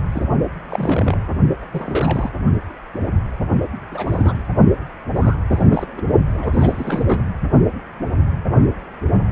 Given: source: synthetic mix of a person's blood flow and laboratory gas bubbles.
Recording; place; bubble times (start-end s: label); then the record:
Doppler ultrasound of blood flow; precordium
0.12-0.25 s: bubbles
0.69-1.18 s: bubbles
1.61-1.67 s: bubbles
1.71-2.30 s: bubbles
3.91-4.42 s: bubbles
5.15-5.36 s: bubbles
5.51-5.87 s: bubbles
5.97-6.02 s: bubbles
6.32-7.21 s: bubbles
From the record:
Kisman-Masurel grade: 332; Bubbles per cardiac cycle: rolling drumbeat, 9 or more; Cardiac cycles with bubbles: 50 to 99%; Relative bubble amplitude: moderate (0.250 to 0.450); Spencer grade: 3 (all of the cardiac periods contain showers or single bubble signals, but not dominating or overriding the cardiac motion signals); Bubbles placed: only in the low amplitude regions of the cardiac cycle